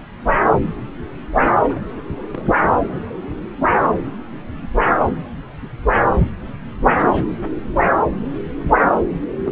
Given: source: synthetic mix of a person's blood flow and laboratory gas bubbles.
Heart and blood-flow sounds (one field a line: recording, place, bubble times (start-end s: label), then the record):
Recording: Doppler ultrasound of blood flow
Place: subclavian vein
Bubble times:
1.65-1.79 s: bubbles
2.33-2.52 s: bubbles
4.59-4.67 s: bubbles
6.96-7.24 s: bubbles
9.44-9.52 s: bubbles
From the record:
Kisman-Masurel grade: 121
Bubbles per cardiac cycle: 1 to 2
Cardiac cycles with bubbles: 10 to 50%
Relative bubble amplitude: barely perceptible (0.100 to 0.250)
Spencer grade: 2 (many but less than half of the cardiac periods contain bubble signals, singularly or in groups)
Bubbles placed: anywhere in the cardiac cycle